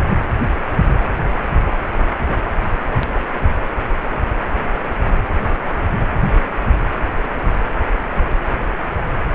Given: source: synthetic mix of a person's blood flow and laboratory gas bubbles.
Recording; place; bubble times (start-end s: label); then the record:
Doppler ultrasound of blood flow; precordium
no bubbles
From the record:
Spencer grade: 0 (complete lack of bubble signals)